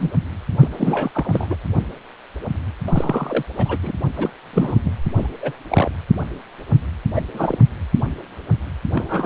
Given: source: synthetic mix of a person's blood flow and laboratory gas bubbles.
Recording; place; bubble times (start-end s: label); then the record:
Doppler ultrasound of blood flow; precordium
0.00-0.11 s: bubbles
0.59-0.69 s: bubbles
0.71-1.11 s: bubbles
1.14-1.56 s: bubbles
2.87-3.44 s: bubbles
3.57-3.77 s: bubbles
3.82-3.92 s: bubbles
4.15-4.30 s: bubbles
4.53-4.78 s: bubbles
4.82-4.92 s: bubbles
5.17-5.33 s: bubbles
5.40-5.56 s: bubbles
5.70-5.91 s: bubbles
7.15-7.21 s: bubbles
7.33-7.57 s: bubbles
8.93-9.26 s: bubbles
From the record:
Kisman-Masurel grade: 232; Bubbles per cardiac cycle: several, 3 to 8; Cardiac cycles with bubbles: 50 to 99%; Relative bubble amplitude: moderate (0.250 to 0.450); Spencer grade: 3 (all of the cardiac periods contain showers or single bubble signals, but not dominating or overriding the cardiac motion signals); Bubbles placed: anywhere in the cardiac cycle